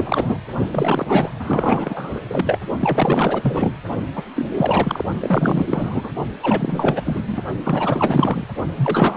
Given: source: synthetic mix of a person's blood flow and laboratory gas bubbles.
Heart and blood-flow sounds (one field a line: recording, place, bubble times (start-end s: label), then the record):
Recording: Doppler ultrasound of blood flow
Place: precordium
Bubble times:
0.00-0.38 s: bubbles
0.71-1.30 s: bubbles
1.39-2.20 s: bubbles
2.29-2.58 s: bubbles
2.81-3.75 s: bubbles
4.16-4.24 s: bubbles
4.36-5.03 s: bubbles
5.20-6.09 s: bubbles
6.42-7.23 s: bubbles
7.26-7.41 s: bubbles
7.63-8.45 s: bubbles
8.76-9.17 s: bubbles
From the record:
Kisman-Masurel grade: 444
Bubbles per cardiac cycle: continuous sound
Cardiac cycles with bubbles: 100%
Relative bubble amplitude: maximal (0.775 to 0.999)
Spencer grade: 4 (maximum detectable bubble signal sounding continuously throughout systole and diastole of every cardiac period, and overriding the amplitude of the normal cardiac signals)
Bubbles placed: only in the low amplitude regions of the cardiac cycle